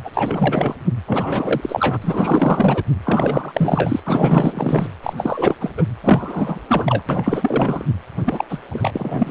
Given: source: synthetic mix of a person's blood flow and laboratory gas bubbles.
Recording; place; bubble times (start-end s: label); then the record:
Doppler ultrasound of blood flow; precordium
0.04-0.11 s: bubbles
0.13-0.75 s: bubbles
1.06-1.99 s: bubbles
2.02-2.83 s: bubbles
3.04-4.00 s: bubbles
4.04-4.88 s: bubbles
5.03-5.13 s: bubbles
5.17-5.55 s: bubbles
5.59-5.71 s: bubbles
5.77-5.84 s: bubbles
6.04-6.60 s: bubbles
6.66-7.04 s: bubbles
7.08-7.86 s: bubbles
8.25-8.44 s: bubbles
8.49-8.60 s: bubbles
8.68-9.31 s: bubbles
From the record:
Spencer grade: 4 (maximum detectable bubble signal sounding continuously throughout systole and diastole of every cardiac period, and overriding the amplitude of the normal cardiac signals); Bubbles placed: anywhere in the cardiac cycle